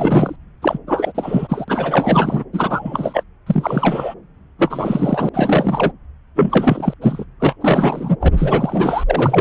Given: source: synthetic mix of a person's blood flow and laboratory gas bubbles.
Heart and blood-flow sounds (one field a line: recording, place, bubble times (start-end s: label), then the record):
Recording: Doppler ultrasound of blood flow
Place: subclavian vein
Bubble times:
0.00-0.36 s: bubbles
0.62-0.79 s: bubbles
0.87-1.12 s: bubbles
1.15-1.65 s: bubbles
1.68-2.44 s: bubbles
2.53-3.23 s: bubbles
3.46-4.14 s: bubbles
4.58-5.29 s: bubbles
5.33-5.92 s: bubbles
6.35-6.93 s: bubbles
7.01-7.25 s: bubbles
7.39-7.55 s: bubbles
7.61-8.16 s: bubbles
8.20-8.29 s: bubbles
8.37-9.04 s: bubbles
9.06-9.41 s: bubbles
From the record:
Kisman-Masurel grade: 343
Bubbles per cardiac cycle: rolling drumbeat, 9 or more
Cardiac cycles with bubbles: 100%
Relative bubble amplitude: loud (0.450 to 0.775)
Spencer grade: 3 (all of the cardiac periods contain showers or single bubble signals, but not dominating or overriding the cardiac motion signals)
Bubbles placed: anywhere in the cardiac cycle